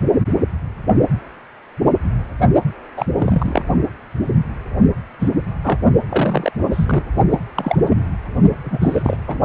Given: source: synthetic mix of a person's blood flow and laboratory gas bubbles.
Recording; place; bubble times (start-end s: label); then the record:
Doppler ultrasound of blood flow; precordium
2.96-3.06 s: bubbles
3.19-3.65 s: bubbles
5.19-5.29 s: bubbles
5.63-5.79 s: bubbles
6.09-6.51 s: bubbles
6.71-7.04 s: bubbles
7.30-7.38 s: bubbles
7.56-7.97 s: bubbles
8.64-9.17 s: bubbles
9.27-9.38 s: bubbles
From the record:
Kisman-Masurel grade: 232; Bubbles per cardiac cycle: several, 3 to 8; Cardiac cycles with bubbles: 50 to 99%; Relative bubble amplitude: moderate (0.250 to 0.450); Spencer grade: 3 (all of the cardiac periods contain showers or single bubble signals, but not dominating or overriding the cardiac motion signals); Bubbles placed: only in the low amplitude regions of the cardiac cycle